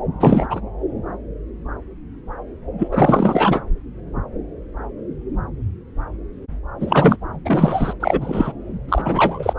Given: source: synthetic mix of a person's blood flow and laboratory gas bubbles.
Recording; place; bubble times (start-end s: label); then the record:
Doppler ultrasound of blood flow; subclavian vein
0.19-0.47 s: bubbles
0.50-0.60 s: bubbles
2.79-2.88 s: bubbles
2.91-3.62 s: bubbles
6.80-7.17 s: bubbles
7.45-7.93 s: bubbles
8.00-8.52 s: bubbles
8.88-9.53 s: bubbles
From the record:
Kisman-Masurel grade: 223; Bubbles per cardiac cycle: several, 3 to 8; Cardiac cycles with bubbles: 10 to 50%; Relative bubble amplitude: loud (0.450 to 0.775); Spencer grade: 2 (many but less than half of the cardiac periods contain bubble signals, singularly or in groups); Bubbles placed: anywhere in the cardiac cycle